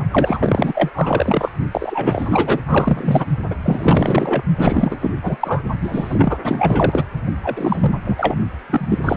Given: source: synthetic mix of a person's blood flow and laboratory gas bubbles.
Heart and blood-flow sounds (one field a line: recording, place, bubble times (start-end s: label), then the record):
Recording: Doppler ultrasound of blood flow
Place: precordium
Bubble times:
0.10-0.90 s: bubbles
0.94-1.52 s: bubbles
1.71-2.60 s: bubbles
2.67-3.26 s: bubbles
3.50-3.55 s: bubbles
3.64-4.43 s: bubbles
4.57-5.11 s: bubbles
5.23-5.37 s: bubbles
5.40-5.64 s: bubbles
5.81-6.39 s: bubbles
6.44-7.05 s: bubbles
7.43-7.98 s: bubbles
8.04-8.37 s: bubbles
8.70-9.00 s: bubbles
9.03-9.17 s: bubbles
From the record:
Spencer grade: 4 (maximum detectable bubble signal sounding continuously throughout systole and diastole of every cardiac period, and overriding the amplitude of the normal cardiac signals)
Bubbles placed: only in the low amplitude regions of the cardiac cycle